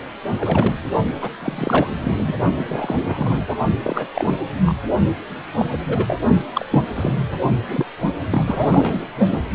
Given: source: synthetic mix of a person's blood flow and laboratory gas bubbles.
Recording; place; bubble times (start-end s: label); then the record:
Doppler ultrasound of blood flow; precordium
0.38-0.76 s: bubbles
1.21-1.29 s: bubbles
1.43-1.88 s: bubbles
2.04-2.35 s: bubbles
2.54-2.96 s: bubbles
3.02-3.44 s: bubbles
3.48-3.54 s: bubbles
3.83-4.11 s: bubbles
4.14-4.41 s: bubbles
4.66-4.75 s: bubbles
5.58-5.66 s: bubbles
5.71-5.79 s: bubbles
5.88-6.20 s: bubbles
6.53-6.66 s: bubbles
6.71-6.83 s: bubbles
6.95-7.14 s: bubbles
7.67-7.85 s: bubbles
8.30-9.05 s: bubbles
9.29-9.38 s: bubbles
From the record:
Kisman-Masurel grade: 232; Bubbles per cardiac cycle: several, 3 to 8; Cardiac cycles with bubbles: 50 to 99%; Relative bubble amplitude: moderate (0.250 to 0.450); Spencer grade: 3 (all of the cardiac periods contain showers or single bubble signals, but not dominating or overriding the cardiac motion signals); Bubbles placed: only in the low amplitude regions of the cardiac cycle